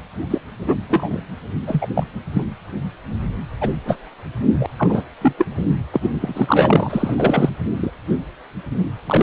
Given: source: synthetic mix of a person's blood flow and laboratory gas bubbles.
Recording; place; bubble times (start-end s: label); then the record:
Doppler ultrasound of blood flow; precordium
0.30-0.38 s: bubbles
0.67-0.75 s: bubbles
0.89-1.20 s: bubbles
1.67-1.87 s: bubbles
1.95-2.04 s: bubbles
2.33-2.45 s: bubbles
3.60-3.68 s: bubbles
3.85-3.97 s: bubbles
4.59-4.66 s: bubbles
4.77-5.04 s: bubbles
5.21-5.32 s: bubbles
5.38-5.46 s: bubbles
5.93-6.00 s: bubbles
6.03-6.09 s: bubbles
6.21-7.50 s: bubbles
7.77-7.90 s: bubbles
9.06-9.23 s: bubbles
From the record:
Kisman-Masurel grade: 233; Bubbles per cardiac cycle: several, 3 to 8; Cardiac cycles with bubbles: 50 to 99%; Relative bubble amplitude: loud (0.450 to 0.775); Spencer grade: 3 (all of the cardiac periods contain showers or single bubble signals, but not dominating or overriding the cardiac motion signals); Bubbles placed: anywhere in the cardiac cycle